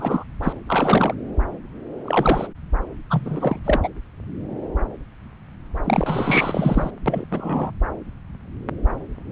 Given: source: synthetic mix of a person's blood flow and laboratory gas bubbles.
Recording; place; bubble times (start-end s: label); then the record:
Doppler ultrasound of blood flow; subclavian vein
0.00-0.24 s: bubbles
0.42-0.52 s: bubbles
0.67-1.15 s: bubbles
2.05-2.48 s: bubbles
3.10-3.59 s: bubbles
3.65-3.88 s: bubbles
5.84-6.91 s: bubbles
7.06-7.25 s: bubbles
7.30-7.71 s: bubbles
9.30-9.32 s: bubbles
From the record:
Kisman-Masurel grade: 232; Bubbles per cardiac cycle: several, 3 to 8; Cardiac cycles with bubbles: 50 to 99%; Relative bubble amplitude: moderate (0.250 to 0.450); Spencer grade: 3 (all of the cardiac periods contain showers or single bubble signals, but not dominating or overriding the cardiac motion signals); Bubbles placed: anywhere in the cardiac cycle